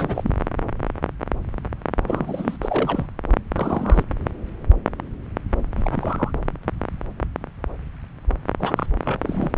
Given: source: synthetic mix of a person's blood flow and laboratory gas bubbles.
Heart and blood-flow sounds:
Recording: Doppler ultrasound of blood flow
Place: subclavian vein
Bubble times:
0.00-0.31 s: bubbles
2.04-2.57 s: bubbles
2.62-3.06 s: bubbles
3.54-4.04 s: bubbles
5.77-6.31 s: bubbles
8.60-8.86 s: bubbles
9.04-9.20 s: bubbles
9.22-9.52 s: bubbles
From the record:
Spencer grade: 2 (many but less than half of the cardiac periods contain bubble signals, singularly or in groups)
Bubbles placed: anywhere in the cardiac cycle

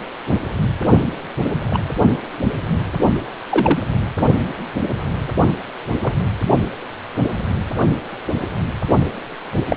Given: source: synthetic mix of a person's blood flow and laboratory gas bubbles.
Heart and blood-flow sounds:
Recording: Doppler ultrasound of blood flow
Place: precordium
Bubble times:
1.70-1.80 s: bubbles
3.50-3.80 s: bubbles
6.02-6.14 s: bubbles
9.67-9.77 s: bubbles
From the record:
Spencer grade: 2 (many but less than half of the cardiac periods contain bubble signals, singularly or in groups)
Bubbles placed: only in the low amplitude regions of the cardiac cycle

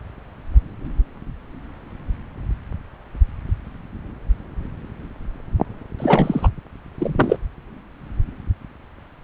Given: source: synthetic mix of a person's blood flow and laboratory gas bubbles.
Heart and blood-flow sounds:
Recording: Doppler ultrasound of blood flow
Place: subclavian vein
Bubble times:
5.99-6.49 s: bubbles
6.98-7.37 s: bubbles
From the record:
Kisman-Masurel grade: 213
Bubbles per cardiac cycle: several, 3 to 8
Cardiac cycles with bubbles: 1 to 10%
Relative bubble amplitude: loud (0.450 to 0.775)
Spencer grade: 1 (occasional bubble signal discernible with the cardiac motion signal, with majority of cardiac periods free of bubbles)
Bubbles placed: anywhere in the cardiac cycle

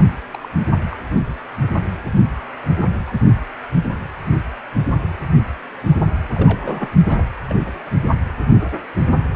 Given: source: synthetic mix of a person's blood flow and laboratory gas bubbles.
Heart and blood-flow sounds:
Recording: Doppler ultrasound of blood flow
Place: precordium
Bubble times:
0.33-0.49 s: bubbles
0.92-0.97 s: bubbles
2.77-2.85 s: bubbles
3.02-3.14 s: bubbles
6.34-6.88 s: bubbles
7.08-7.23 s: bubbles
7.49-7.60 s: bubbles
7.66-7.71 s: bubbles
From the record:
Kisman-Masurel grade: 221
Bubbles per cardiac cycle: several, 3 to 8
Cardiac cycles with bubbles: 10 to 50%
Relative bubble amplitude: barely perceptible (0.100 to 0.250)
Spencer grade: 2 (many but less than half of the cardiac periods contain bubble signals, singularly or in groups)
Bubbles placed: only in the low amplitude regions of the cardiac cycle

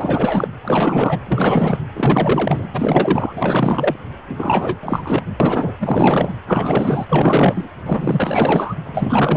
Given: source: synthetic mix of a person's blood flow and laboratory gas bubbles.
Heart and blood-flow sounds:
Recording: Doppler ultrasound of blood flow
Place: precordium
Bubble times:
0.00-0.48 s: bubbles
0.64-1.19 s: bubbles
1.26-1.79 s: bubbles
1.94-2.68 s: bubbles
2.73-3.96 s: bubbles
4.37-4.78 s: bubbles
4.83-5.22 s: bubbles
5.40-5.74 s: bubbles
5.79-6.31 s: bubbles
6.46-7.05 s: bubbles
7.08-7.68 s: bubbles
7.85-8.75 s: bubbles
8.85-9.36 s: bubbles
From the record:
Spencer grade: 4 (maximum detectable bubble signal sounding continuously throughout systole and diastole of every cardiac period, and overriding the amplitude of the normal cardiac signals)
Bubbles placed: anywhere in the cardiac cycle

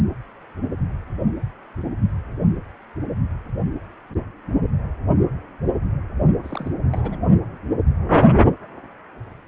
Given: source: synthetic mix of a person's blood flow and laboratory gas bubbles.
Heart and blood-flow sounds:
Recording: Doppler ultrasound of blood flow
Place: precordium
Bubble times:
6.43-6.71 s: bubbles
6.93-7.17 s: bubbles
From the record:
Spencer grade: 2 (many but less than half of the cardiac periods contain bubble signals, singularly or in groups)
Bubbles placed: only in the low amplitude regions of the cardiac cycle

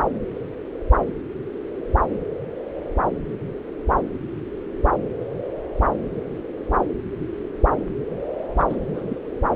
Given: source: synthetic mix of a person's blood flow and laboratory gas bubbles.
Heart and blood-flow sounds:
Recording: Doppler ultrasound of blood flow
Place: subclavian vein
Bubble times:
8.57-8.65 s: bubbles
8.70-8.76 s: bubbles
8.94-9.19 s: bubbles
From the record:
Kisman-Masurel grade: 211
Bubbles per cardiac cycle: several, 3 to 8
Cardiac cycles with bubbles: 1 to 10%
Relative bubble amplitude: barely perceptible (0.100 to 0.250)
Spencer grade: 1 (occasional bubble signal discernible with the cardiac motion signal, with majority of cardiac periods free of bubbles)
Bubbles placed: anywhere in the cardiac cycle

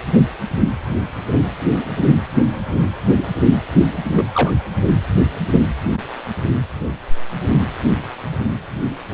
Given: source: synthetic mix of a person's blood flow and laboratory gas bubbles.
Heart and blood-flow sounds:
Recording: Doppler ultrasound of blood flow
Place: precordium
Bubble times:
4.15-4.30 s: bubbles
4.34-4.51 s: bubbles
From the record:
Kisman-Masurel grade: 112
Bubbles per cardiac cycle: 1 to 2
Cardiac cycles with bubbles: 1 to 10%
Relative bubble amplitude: moderate (0.250 to 0.450)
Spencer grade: 1 (occasional bubble signal discernible with the cardiac motion signal, with majority of cardiac periods free of bubbles)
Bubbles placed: anywhere in the cardiac cycle

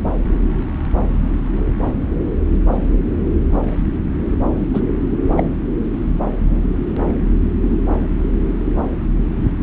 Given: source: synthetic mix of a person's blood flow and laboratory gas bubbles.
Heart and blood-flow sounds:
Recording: Doppler ultrasound of blood flow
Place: subclavian vein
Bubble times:
4.73-4.82 s: bubbles
5.37-5.43 s: bubbles
From the record:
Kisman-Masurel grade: 113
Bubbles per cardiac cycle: 1 to 2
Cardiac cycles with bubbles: 1 to 10%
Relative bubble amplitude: loud (0.450 to 0.775)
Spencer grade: 1 (occasional bubble signal discernible with the cardiac motion signal, with majority of cardiac periods free of bubbles)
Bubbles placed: anywhere in the cardiac cycle

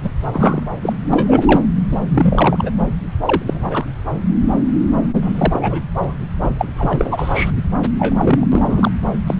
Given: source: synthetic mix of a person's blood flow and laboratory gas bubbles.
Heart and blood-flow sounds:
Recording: Doppler ultrasound of blood flow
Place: subclavian vein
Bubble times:
0.04-0.09 s: bubbles
0.33-0.61 s: bubbles
0.82-0.93 s: bubbles
1.13-1.43 s: bubbles
1.47-1.61 s: bubbles
1.89-1.99 s: bubbles
2.08-2.71 s: bubbles
3.12-3.15 s: bubbles
3.25-3.42 s: bubbles
3.46-3.86 s: bubbles
5.21-5.81 s: bubbles
6.04-6.14 s: bubbles
6.33-6.50 s: bubbles
6.58-6.66 s: bubbles
6.78-7.51 s: bubbles
7.99-8.46 s: bubbles
8.51-8.91 s: bubbles
9.26-9.35 s: bubbles
From the record:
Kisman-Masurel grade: 233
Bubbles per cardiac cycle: several, 3 to 8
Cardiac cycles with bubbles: 50 to 99%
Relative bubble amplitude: loud (0.450 to 0.775)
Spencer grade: 3 (all of the cardiac periods contain showers or single bubble signals, but not dominating or overriding the cardiac motion signals)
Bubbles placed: anywhere in the cardiac cycle

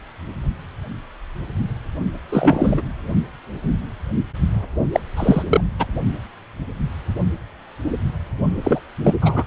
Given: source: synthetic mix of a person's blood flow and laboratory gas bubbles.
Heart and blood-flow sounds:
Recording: Doppler ultrasound of blood flow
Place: precordium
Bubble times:
2.29-2.82 s: bubbles
4.92-5.00 s: bubbles
5.17-5.42 s: bubbles
5.47-5.61 s: bubbles
5.79-5.85 s: bubbles
8.63-8.80 s: bubbles
9.04-9.15 s: bubbles
9.21-9.43 s: bubbles
From the record:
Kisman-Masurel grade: 223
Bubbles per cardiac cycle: several, 3 to 8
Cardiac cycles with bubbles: 10 to 50%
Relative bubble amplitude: loud (0.450 to 0.775)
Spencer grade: 2 (many but less than half of the cardiac periods contain bubble signals, singularly or in groups)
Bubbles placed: only in the low amplitude regions of the cardiac cycle

